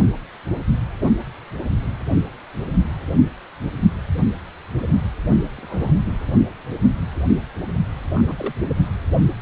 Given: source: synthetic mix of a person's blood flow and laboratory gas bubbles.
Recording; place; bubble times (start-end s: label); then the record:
Doppler ultrasound of blood flow; precordium
5.57-5.93 s: bubbles
6.06-6.12 s: bubbles
8.15-8.54 s: bubbles
From the record:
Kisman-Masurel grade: 121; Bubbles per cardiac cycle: 1 to 2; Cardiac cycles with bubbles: 10 to 50%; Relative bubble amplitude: barely perceptible (0.100 to 0.250); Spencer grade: 2 (many but less than half of the cardiac periods contain bubble signals, singularly or in groups); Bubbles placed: only in the low amplitude regions of the cardiac cycle